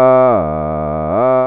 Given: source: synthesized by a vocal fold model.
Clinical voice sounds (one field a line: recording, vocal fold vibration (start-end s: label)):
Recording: sustained vowel that changes in the middle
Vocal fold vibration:
0.00-0.26 s: 129.1 Hz, open quotient 0.28
0.46-1.06 s: 76.8 Hz, open quotient 0.31
1.26-1.47 s: 129.1 Hz, open quotient 0.28